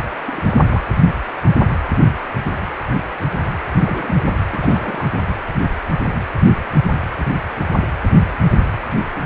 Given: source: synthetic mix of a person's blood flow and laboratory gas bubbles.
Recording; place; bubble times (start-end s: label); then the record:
Doppler ultrasound of blood flow; precordium
0.00-0.04 s: bubbles
0.27-0.42 s: bubbles
0.44-0.65 s: bubbles
0.68-0.83 s: bubbles
3.77-4.23 s: bubbles
4.25-4.35 s: bubbles
4.52-5.11 s: bubbles
From the record:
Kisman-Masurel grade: 221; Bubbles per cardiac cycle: several, 3 to 8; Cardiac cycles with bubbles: 10 to 50%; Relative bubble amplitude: barely perceptible (0.100 to 0.250); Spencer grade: 2 (many but less than half of the cardiac periods contain bubble signals, singularly or in groups); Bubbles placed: anywhere in the cardiac cycle